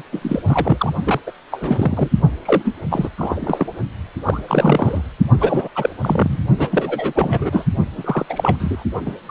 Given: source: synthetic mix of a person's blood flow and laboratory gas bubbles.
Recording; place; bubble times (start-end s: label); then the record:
Doppler ultrasound of blood flow; precordium
0.00-0.02 s: bubbles
0.12-0.42 s: bubbles
0.47-0.93 s: bubbles
1.03-1.20 s: bubbles
1.27-1.31 s: bubbles
1.52-2.08 s: bubbles
2.45-2.62 s: bubbles
2.65-2.76 s: bubbles
2.90-3.08 s: bubbles
3.17-3.66 s: bubbles
4.23-4.40 s: bubbles
4.48-5.02 s: bubbles
5.40-5.68 s: bubbles
5.75-5.90 s: bubbles
6.01-6.38 s: bubbles
6.58-7.65 s: bubbles
7.98-8.26 s: bubbles
8.29-8.83 s: bubbles
9.05-9.14 s: bubbles
9.26-9.31 s: bubbles
From the record:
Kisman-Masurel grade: 342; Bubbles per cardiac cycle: rolling drumbeat, 9 or more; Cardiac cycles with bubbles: 100%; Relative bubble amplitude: moderate (0.250 to 0.450); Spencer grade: 3 (all of the cardiac periods contain showers or single bubble signals, but not dominating or overriding the cardiac motion signals); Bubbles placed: only in the low amplitude regions of the cardiac cycle